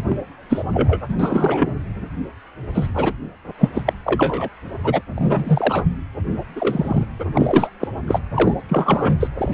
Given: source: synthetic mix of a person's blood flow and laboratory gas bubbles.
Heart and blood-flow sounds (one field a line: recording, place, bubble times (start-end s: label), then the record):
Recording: Doppler ultrasound of blood flow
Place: precordium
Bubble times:
0.08-0.17 s: bubbles
0.49-0.63 s: bubbles
0.74-1.00 s: bubbles
1.08-1.14 s: bubbles
1.18-1.78 s: bubbles
2.74-2.87 s: bubbles
2.94-3.14 s: bubbles
3.58-3.70 s: bubbles
3.74-3.83 s: bubbles
3.85-3.93 s: bubbles
4.04-4.49 s: bubbles
4.83-5.01 s: bubbles
5.14-5.83 s: bubbles
6.55-7.06 s: bubbles
7.19-7.25 s: bubbles
7.35-7.69 s: bubbles
7.79-7.88 s: bubbles
8.07-8.21 s: bubbles
8.34-8.54 s: bubbles
8.69-9.30 s: bubbles
9.38-9.54 s: bubbles
From the record:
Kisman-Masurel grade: 243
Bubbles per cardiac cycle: several, 3 to 8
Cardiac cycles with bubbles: 100%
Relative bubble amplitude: loud (0.450 to 0.775)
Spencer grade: 3 (all of the cardiac periods contain showers or single bubble signals, but not dominating or overriding the cardiac motion signals)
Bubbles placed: anywhere in the cardiac cycle